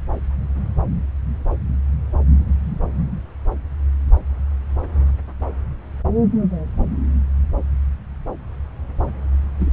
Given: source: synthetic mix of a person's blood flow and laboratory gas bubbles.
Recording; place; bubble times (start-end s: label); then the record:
Doppler ultrasound of blood flow; subclavian vein
9.59-9.71 s: bubbles
From the record:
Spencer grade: 1 (occasional bubble signal discernible with the cardiac motion signal, with majority of cardiac periods free of bubbles); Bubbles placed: anywhere in the cardiac cycle